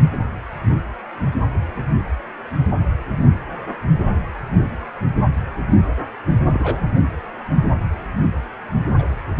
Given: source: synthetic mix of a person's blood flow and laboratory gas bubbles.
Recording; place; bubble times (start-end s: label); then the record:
Doppler ultrasound of blood flow; precordium
6.53-6.80 s: bubbles
8.98-9.04 s: bubbles
From the record:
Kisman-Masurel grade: 121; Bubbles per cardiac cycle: 1 to 2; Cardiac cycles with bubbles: 10 to 50%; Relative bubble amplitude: barely perceptible (0.100 to 0.250); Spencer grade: 2 (many but less than half of the cardiac periods contain bubble signals, singularly or in groups); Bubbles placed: anywhere in the cardiac cycle